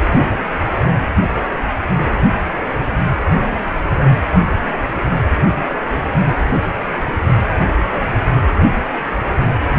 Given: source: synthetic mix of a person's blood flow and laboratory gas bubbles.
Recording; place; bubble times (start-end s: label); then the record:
Doppler ultrasound of blood flow; precordium
no bubbles
From the record:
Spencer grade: 0 (complete lack of bubble signals)